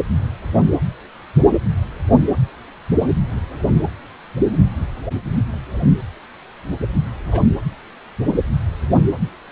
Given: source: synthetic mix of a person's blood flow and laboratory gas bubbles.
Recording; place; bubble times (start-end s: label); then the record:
Doppler ultrasound of blood flow; precordium
7.28-7.41 s: bubbles
From the record:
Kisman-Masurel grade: 111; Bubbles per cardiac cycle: 1 to 2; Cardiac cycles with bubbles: 1 to 10%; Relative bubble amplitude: barely perceptible (0.100 to 0.250); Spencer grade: 1 (occasional bubble signal discernible with the cardiac motion signal, with majority of cardiac periods free of bubbles); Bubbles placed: anywhere in the cardiac cycle